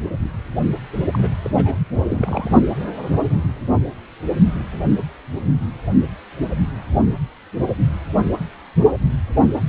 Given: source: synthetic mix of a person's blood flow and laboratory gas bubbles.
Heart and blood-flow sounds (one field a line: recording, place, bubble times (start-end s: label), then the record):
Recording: Doppler ultrasound of blood flow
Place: precordium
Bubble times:
0.72-0.78 s: bubbles
1.11-1.32 s: bubbles
1.42-1.78 s: bubbles
2.06-2.59 s: bubbles
From the record:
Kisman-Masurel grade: 221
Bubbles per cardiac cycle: several, 3 to 8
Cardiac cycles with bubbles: 10 to 50%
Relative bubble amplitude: barely perceptible (0.100 to 0.250)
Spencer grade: 2 (many but less than half of the cardiac periods contain bubble signals, singularly or in groups)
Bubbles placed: anywhere in the cardiac cycle